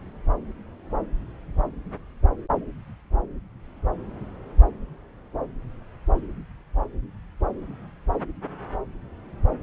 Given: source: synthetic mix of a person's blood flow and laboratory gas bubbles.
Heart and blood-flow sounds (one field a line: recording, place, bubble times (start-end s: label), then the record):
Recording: Doppler ultrasound of blood flow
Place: subclavian vein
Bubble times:
no bubbles
From the record:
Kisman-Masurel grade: 000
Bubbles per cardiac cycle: 0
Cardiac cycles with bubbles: 0%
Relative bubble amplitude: no bubbles discernible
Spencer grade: 0 (complete lack of bubble signals)